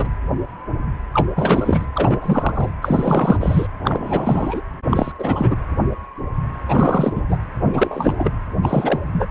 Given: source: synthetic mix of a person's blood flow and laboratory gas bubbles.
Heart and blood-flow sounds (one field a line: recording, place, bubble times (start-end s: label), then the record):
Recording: Doppler ultrasound of blood flow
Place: precordium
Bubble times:
0.00-0.09 s: bubbles
1.13-1.27 s: bubbles
1.36-1.85 s: bubbles
1.94-2.19 s: bubbles
2.22-2.71 s: bubbles
2.81-3.67 s: bubbles
3.79-4.62 s: bubbles
4.89-5.12 s: bubbles
5.18-5.56 s: bubbles
6.68-7.22 s: bubbles
7.29-7.37 s: bubbles
7.54-8.32 s: bubbles
8.62-9.01 s: bubbles
9.12-9.26 s: bubbles
From the record:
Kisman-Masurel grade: 333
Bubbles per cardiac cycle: rolling drumbeat, 9 or more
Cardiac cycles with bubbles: 50 to 99%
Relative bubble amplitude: loud (0.450 to 0.775)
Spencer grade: 3 (all of the cardiac periods contain showers or single bubble signals, but not dominating or overriding the cardiac motion signals)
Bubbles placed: anywhere in the cardiac cycle